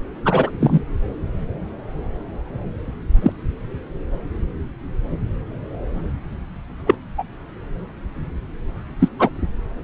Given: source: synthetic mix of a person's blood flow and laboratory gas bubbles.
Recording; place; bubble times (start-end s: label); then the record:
Doppler ultrasound of blood flow; subclavian vein
0.25-0.51 s: bubbles
0.60-0.83 s: bubbles
3.21-3.32 s: bubbles
6.87-6.96 s: bubbles
7.18-7.24 s: bubbles
8.99-9.08 s: bubbles
9.19-9.29 s: bubbles
From the record:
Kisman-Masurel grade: 123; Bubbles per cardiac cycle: 1 to 2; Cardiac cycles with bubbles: 10 to 50%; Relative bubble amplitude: loud (0.450 to 0.775); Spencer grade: 2 (many but less than half of the cardiac periods contain bubble signals, singularly or in groups); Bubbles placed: anywhere in the cardiac cycle